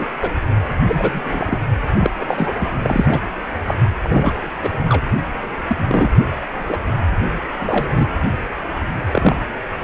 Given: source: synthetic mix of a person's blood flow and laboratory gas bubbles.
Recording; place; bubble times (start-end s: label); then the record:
Doppler ultrasound of blood flow; precordium
0.00-0.06 s: bubbles
0.21-0.35 s: bubbles
0.87-1.21 s: bubbles
1.25-1.58 s: bubbles
2.00-2.10 s: bubbles
2.19-2.53 s: bubbles
2.58-2.71 s: bubbles
2.82-3.21 s: bubbles
3.66-3.75 s: bubbles
4.03-4.52 s: bubbles
4.62-4.69 s: bubbles
4.88-5.02 s: bubbles
5.68-6.12 s: bubbles
6.68-6.77 s: bubbles
7.59-8.07 s: bubbles
9.12-9.36 s: bubbles
9.79-9.84 s: bubbles
From the record:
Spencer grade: 3 (all of the cardiac periods contain showers or single bubble signals, but not dominating or overriding the cardiac motion signals); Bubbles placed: anywhere in the cardiac cycle